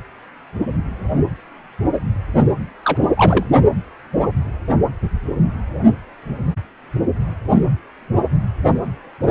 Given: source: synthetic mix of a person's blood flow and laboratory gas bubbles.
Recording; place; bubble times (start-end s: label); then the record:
Doppler ultrasound of blood flow; precordium
2.82-2.97 s: bubbles
3.17-3.44 s: bubbles
From the record:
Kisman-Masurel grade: 212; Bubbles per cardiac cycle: several, 3 to 8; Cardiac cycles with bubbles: 1 to 10%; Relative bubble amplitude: moderate (0.250 to 0.450); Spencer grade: 1 (occasional bubble signal discernible with the cardiac motion signal, with majority of cardiac periods free of bubbles); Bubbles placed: only in the low amplitude regions of the cardiac cycle